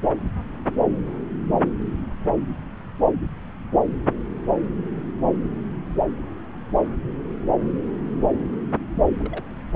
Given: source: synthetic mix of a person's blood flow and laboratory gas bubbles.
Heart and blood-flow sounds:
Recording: Doppler ultrasound of blood flow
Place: subclavian vein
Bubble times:
9.18-9.44 s: bubbles
From the record:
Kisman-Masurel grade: 111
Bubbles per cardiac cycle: 1 to 2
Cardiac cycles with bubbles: 1 to 10%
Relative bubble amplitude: barely perceptible (0.100 to 0.250)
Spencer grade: 1 (occasional bubble signal discernible with the cardiac motion signal, with majority of cardiac periods free of bubbles)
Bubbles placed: anywhere in the cardiac cycle

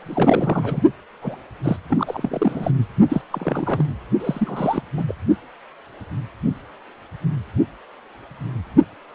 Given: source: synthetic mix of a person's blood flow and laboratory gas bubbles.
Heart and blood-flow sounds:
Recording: Doppler ultrasound of blood flow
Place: precordium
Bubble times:
0.03-0.82 s: bubbles
1.22-1.40 s: bubbles
1.64-1.76 s: bubbles
1.90-2.71 s: bubbles
3.09-3.21 s: bubbles
3.30-3.85 s: bubbles
4.20-4.83 s: bubbles
4.96-5.04 s: bubbles
5.08-5.14 s: bubbles
From the record:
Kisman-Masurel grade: 332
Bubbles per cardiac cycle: rolling drumbeat, 9 or more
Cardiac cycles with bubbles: 50 to 99%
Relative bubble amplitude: moderate (0.250 to 0.450)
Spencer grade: 3 (all of the cardiac periods contain showers or single bubble signals, but not dominating or overriding the cardiac motion signals)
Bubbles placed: only in the low amplitude regions of the cardiac cycle

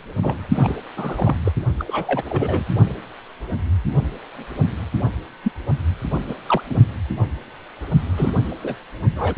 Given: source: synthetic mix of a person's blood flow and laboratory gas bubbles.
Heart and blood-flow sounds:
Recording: Doppler ultrasound of blood flow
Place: precordium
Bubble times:
0.23-0.38 s: bubbles
0.52-0.76 s: bubbles
0.96-1.38 s: bubbles
1.45-1.52 s: bubbles
1.78-2.64 s: bubbles
5.43-5.52 s: bubbles
6.28-6.34 s: bubbles
6.46-6.62 s: bubbles
6.69-6.78 s: bubbles
8.16-8.30 s: bubbles
8.62-8.75 s: bubbles
9.15-9.34 s: bubbles
From the record:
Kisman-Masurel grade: 232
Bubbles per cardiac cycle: several, 3 to 8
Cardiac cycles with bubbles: 50 to 99%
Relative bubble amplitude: moderate (0.250 to 0.450)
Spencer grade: 3 (all of the cardiac periods contain showers or single bubble signals, but not dominating or overriding the cardiac motion signals)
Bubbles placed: only in the low amplitude regions of the cardiac cycle

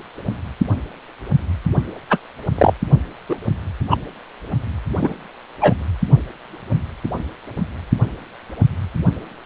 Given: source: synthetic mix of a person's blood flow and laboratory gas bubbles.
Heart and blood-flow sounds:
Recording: Doppler ultrasound of blood flow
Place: precordium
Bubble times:
2.10-2.18 s: bubbles
2.57-2.73 s: bubbles
3.28-3.36 s: bubbles
3.90-3.97 s: bubbles
5.01-5.13 s: bubbles
5.61-5.74 s: bubbles
From the record:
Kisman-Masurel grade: 123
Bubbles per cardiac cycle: 1 to 2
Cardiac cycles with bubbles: 10 to 50%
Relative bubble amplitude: loud (0.450 to 0.775)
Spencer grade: 2 (many but less than half of the cardiac periods contain bubble signals, singularly or in groups)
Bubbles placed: only in the low amplitude regions of the cardiac cycle

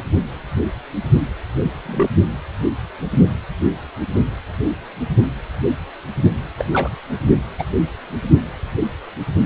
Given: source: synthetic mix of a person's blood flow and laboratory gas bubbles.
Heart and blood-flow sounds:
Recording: Doppler ultrasound of blood flow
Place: precordium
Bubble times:
1.62-1.73 s: bubbles
1.85-2.10 s: bubbles
6.58-6.65 s: bubbles
6.73-6.91 s: bubbles
7.58-7.64 s: bubbles
From the record:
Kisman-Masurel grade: 122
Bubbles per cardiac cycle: 1 to 2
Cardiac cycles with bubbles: 10 to 50%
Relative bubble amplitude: moderate (0.250 to 0.450)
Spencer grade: 2 (many but less than half of the cardiac periods contain bubble signals, singularly or in groups)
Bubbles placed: only in the low amplitude regions of the cardiac cycle

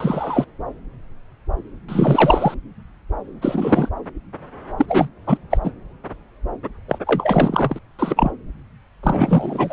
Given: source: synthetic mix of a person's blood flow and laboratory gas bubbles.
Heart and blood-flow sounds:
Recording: Doppler ultrasound of blood flow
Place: subclavian vein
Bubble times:
0.00-0.45 s: bubbles
1.89-2.55 s: bubbles
3.42-3.89 s: bubbles
4.77-5.08 s: bubbles
5.26-5.38 s: bubbles
5.50-5.58 s: bubbles
5.63-5.71 s: bubbles
6.88-6.98 s: bubbles
7.06-7.79 s: bubbles
7.99-8.31 s: bubbles
9.03-9.73 s: bubbles
From the record:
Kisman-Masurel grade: 233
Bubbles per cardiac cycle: several, 3 to 8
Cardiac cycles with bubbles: 50 to 99%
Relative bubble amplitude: loud (0.450 to 0.775)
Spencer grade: 3 (all of the cardiac periods contain showers or single bubble signals, but not dominating or overriding the cardiac motion signals)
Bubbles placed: anywhere in the cardiac cycle

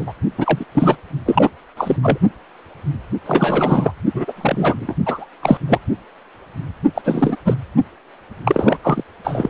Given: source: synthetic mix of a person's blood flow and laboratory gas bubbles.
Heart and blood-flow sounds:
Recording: Doppler ultrasound of blood flow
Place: precordium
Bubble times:
0.00-0.12 s: bubbles
0.37-0.66 s: bubbles
0.74-0.98 s: bubbles
1.26-1.50 s: bubbles
1.77-1.96 s: bubbles
2.03-2.18 s: bubbles
3.26-3.92 s: bubbles
4.13-4.33 s: bubbles
4.36-4.95 s: bubbles
5.05-5.26 s: bubbles
5.42-5.58 s: bubbles
5.67-5.80 s: bubbles
6.95-7.01 s: bubbles
7.04-7.37 s: bubbles
7.45-7.56 s: bubbles
8.44-8.77 s: bubbles
8.82-9.03 s: bubbles
9.23-9.50 s: bubbles
From the record:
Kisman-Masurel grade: 333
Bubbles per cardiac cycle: rolling drumbeat, 9 or more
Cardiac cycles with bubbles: 50 to 99%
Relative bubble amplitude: loud (0.450 to 0.775)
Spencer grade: 3 (all of the cardiac periods contain showers or single bubble signals, but not dominating or overriding the cardiac motion signals)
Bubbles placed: only in the low amplitude regions of the cardiac cycle

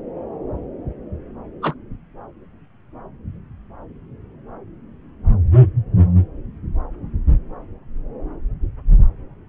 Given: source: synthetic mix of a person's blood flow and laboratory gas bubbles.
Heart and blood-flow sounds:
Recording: Doppler ultrasound of blood flow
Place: subclavian vein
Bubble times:
1.62-1.74 s: bubbles
From the record:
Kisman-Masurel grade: 123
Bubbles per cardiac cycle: 1 to 2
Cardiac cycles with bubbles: 10 to 50%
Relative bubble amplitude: loud (0.450 to 0.775)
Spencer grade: 2 (many but less than half of the cardiac periods contain bubble signals, singularly or in groups)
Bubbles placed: anywhere in the cardiac cycle

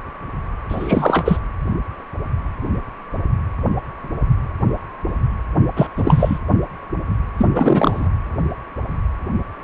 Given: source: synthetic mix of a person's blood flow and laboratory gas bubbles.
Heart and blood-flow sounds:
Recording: Doppler ultrasound of blood flow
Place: precordium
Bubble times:
0.68-1.39 s: bubbles
5.76-5.88 s: bubbles
5.96-6.38 s: bubbles
7.38-7.49 s: bubbles
7.55-8.08 s: bubbles
From the record:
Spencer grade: 2 (many but less than half of the cardiac periods contain bubble signals, singularly or in groups)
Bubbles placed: anywhere in the cardiac cycle

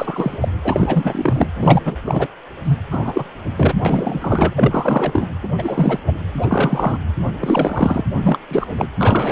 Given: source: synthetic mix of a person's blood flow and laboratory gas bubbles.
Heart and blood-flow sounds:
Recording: Doppler ultrasound of blood flow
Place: precordium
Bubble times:
0.00-0.37 s: bubbles
0.41-0.48 s: bubbles
0.64-1.47 s: bubbles
1.54-1.81 s: bubbles
1.84-1.97 s: bubbles
2.04-2.27 s: bubbles
2.64-2.77 s: bubbles
2.91-3.29 s: bubbles
3.57-3.74 s: bubbles
3.84-5.29 s: bubbles
5.43-5.49 s: bubbles
5.58-6.00 s: bubbles
6.07-6.12 s: bubbles
6.37-6.99 s: bubbles
7.40-8.04 s: bubbles
8.13-8.39 s: bubbles
8.49-8.67 s: bubbles
8.77-8.88 s: bubbles
8.99-9.32 s: bubbles
From the record:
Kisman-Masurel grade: 343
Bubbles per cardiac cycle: rolling drumbeat, 9 or more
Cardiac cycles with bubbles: 100%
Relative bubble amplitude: loud (0.450 to 0.775)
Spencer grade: 3 (all of the cardiac periods contain showers or single bubble signals, but not dominating or overriding the cardiac motion signals)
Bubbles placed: anywhere in the cardiac cycle

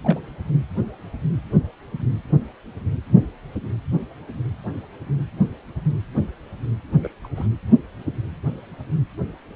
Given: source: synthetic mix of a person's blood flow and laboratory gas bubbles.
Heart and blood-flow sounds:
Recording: Doppler ultrasound of blood flow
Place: precordium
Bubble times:
0.04-0.20 s: bubbles
7.03-7.11 s: bubbles
7.24-7.27 s: bubbles
7.36-7.47 s: bubbles
From the record:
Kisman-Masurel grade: 221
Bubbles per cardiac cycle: several, 3 to 8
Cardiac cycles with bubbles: 10 to 50%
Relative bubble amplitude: barely perceptible (0.100 to 0.250)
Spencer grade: 2 (many but less than half of the cardiac periods contain bubble signals, singularly or in groups)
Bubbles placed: anywhere in the cardiac cycle

